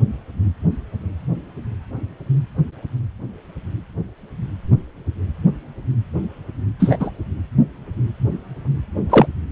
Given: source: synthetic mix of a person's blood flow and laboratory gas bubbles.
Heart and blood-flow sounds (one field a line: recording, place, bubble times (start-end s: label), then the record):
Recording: Doppler ultrasound of blood flow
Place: precordium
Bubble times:
6.79-7.11 s: bubbles
9.09-9.26 s: bubbles
From the record:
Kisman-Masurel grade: 223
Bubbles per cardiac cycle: several, 3 to 8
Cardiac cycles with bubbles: 10 to 50%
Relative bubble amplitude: loud (0.450 to 0.775)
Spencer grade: 2 (many but less than half of the cardiac periods contain bubble signals, singularly or in groups)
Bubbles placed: anywhere in the cardiac cycle